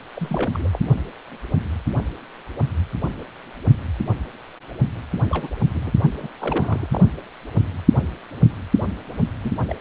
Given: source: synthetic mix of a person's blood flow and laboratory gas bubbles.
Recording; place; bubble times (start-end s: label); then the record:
Doppler ultrasound of blood flow; precordium
0.15-0.49 s: bubbles
0.54-0.68 s: bubbles
0.72-0.79 s: bubbles
5.30-5.50 s: bubbles
5.58-5.98 s: bubbles
6.22-6.29 s: bubbles
6.40-6.89 s: bubbles
6.92-7.01 s: bubbles
9.43-9.63 s: bubbles
9.67-9.74 s: bubbles
From the record:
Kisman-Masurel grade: 221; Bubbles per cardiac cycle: several, 3 to 8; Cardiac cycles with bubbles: 10 to 50%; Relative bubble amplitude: barely perceptible (0.100 to 0.250); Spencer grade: 2 (many but less than half of the cardiac periods contain bubble signals, singularly or in groups); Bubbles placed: only in the low amplitude regions of the cardiac cycle